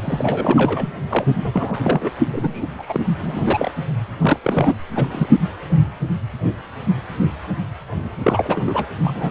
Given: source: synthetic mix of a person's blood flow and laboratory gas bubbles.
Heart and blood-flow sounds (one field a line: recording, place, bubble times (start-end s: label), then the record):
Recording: Doppler ultrasound of blood flow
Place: precordium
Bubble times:
0.00-0.89 s: bubbles
1.09-1.80 s: bubbles
1.83-2.11 s: bubbles
2.33-3.06 s: bubbles
3.19-3.71 s: bubbles
4.19-4.40 s: bubbles
4.43-4.74 s: bubbles
4.96-5.08 s: bubbles
5.12-5.27 s: bubbles
8.23-8.86 s: bubbles
9.03-9.31 s: bubbles
From the record:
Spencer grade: 3 (all of the cardiac periods contain showers or single bubble signals, but not dominating or overriding the cardiac motion signals)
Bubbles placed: only in the low amplitude regions of the cardiac cycle